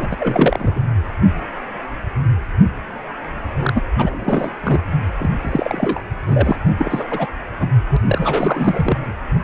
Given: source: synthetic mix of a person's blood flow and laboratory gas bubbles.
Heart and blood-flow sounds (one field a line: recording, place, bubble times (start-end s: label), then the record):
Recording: Doppler ultrasound of blood flow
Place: precordium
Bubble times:
0.00-0.16 s: bubbles
0.20-0.80 s: bubbles
3.59-3.82 s: bubbles
3.97-4.50 s: bubbles
4.63-4.81 s: bubbles
5.19-5.30 s: bubbles
5.41-6.01 s: bubbles
6.27-6.56 s: bubbles
6.78-7.28 s: bubbles
7.59-7.67 s: bubbles
7.89-7.97 s: bubbles
8.06-8.97 s: bubbles
From the record:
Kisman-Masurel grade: 332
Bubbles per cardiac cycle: rolling drumbeat, 9 or more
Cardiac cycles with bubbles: 50 to 99%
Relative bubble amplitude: moderate (0.250 to 0.450)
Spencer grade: 3 (all of the cardiac periods contain showers or single bubble signals, but not dominating or overriding the cardiac motion signals)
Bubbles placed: anywhere in the cardiac cycle